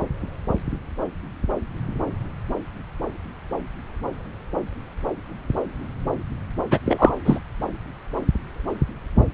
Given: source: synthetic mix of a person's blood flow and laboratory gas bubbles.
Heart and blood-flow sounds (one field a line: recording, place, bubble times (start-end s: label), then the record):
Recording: Doppler ultrasound of blood flow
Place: subclavian vein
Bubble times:
6.71-6.79 s: bubbles
6.85-7.13 s: bubbles
7.25-7.39 s: bubbles
From the record:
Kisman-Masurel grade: 213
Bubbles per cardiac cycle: several, 3 to 8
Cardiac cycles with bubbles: 1 to 10%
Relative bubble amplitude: loud (0.450 to 0.775)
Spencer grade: 1 (occasional bubble signal discernible with the cardiac motion signal, with majority of cardiac periods free of bubbles)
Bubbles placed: anywhere in the cardiac cycle